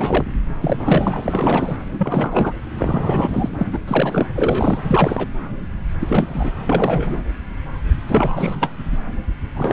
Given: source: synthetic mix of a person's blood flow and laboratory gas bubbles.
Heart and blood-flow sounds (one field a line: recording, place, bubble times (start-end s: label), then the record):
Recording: Doppler ultrasound of blood flow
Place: subclavian vein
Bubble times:
0.00-0.24 s: bubbles
0.61-1.21 s: bubbles
1.24-1.76 s: bubbles
1.93-2.54 s: bubbles
2.77-3.64 s: bubbles
3.72-3.79 s: bubbles
3.88-4.26 s: bubbles
4.35-4.78 s: bubbles
4.87-5.28 s: bubbles
6.00-6.52 s: bubbles
6.66-7.22 s: bubbles
8.07-8.55 s: bubbles
8.61-8.72 s: bubbles
9.55-9.73 s: bubbles
From the record:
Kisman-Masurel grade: 333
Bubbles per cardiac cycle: rolling drumbeat, 9 or more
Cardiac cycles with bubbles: 50 to 99%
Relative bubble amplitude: loud (0.450 to 0.775)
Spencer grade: 3 (all of the cardiac periods contain showers or single bubble signals, but not dominating or overriding the cardiac motion signals)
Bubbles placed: anywhere in the cardiac cycle